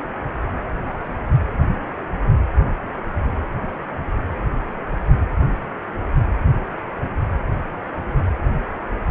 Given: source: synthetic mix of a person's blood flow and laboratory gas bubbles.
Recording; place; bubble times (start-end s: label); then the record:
Doppler ultrasound of blood flow; precordium
0.85-1.13 s: bubbles
From the record:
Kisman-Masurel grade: 111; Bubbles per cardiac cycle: 1 to 2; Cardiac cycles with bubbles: 1 to 10%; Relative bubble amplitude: barely perceptible (0.100 to 0.250); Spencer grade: 1 (occasional bubble signal discernible with the cardiac motion signal, with majority of cardiac periods free of bubbles); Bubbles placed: anywhere in the cardiac cycle